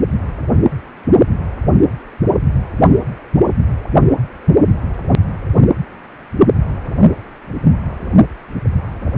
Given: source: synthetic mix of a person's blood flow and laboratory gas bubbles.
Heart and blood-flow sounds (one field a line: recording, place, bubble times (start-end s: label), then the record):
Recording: Doppler ultrasound of blood flow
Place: precordium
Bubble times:
9.15-9.18 s: bubbles
From the record:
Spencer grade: 2 (many but less than half of the cardiac periods contain bubble signals, singularly or in groups)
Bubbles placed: anywhere in the cardiac cycle